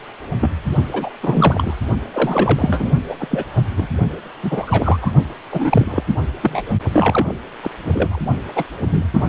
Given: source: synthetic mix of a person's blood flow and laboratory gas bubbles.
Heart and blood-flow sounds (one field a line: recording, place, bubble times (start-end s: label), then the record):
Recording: Doppler ultrasound of blood flow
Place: precordium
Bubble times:
0.40-0.51 s: bubbles
0.93-1.10 s: bubbles
1.23-1.74 s: bubbles
2.12-2.90 s: bubbles
3.08-3.27 s: bubbles
3.30-3.44 s: bubbles
3.52-3.63 s: bubbles
3.77-3.88 s: bubbles
4.43-5.00 s: bubbles
5.02-5.12 s: bubbles
5.52-6.04 s: bubbles
6.42-6.62 s: bubbles
6.92-7.33 s: bubbles
7.62-7.70 s: bubbles
7.85-8.19 s: bubbles
8.55-8.64 s: bubbles
8.89-9.04 s: bubbles
9.13-9.23 s: bubbles
From the record:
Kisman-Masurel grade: 242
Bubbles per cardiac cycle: several, 3 to 8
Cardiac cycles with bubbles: 100%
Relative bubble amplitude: moderate (0.250 to 0.450)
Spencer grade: 3 (all of the cardiac periods contain showers or single bubble signals, but not dominating or overriding the cardiac motion signals)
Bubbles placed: only in the low amplitude regions of the cardiac cycle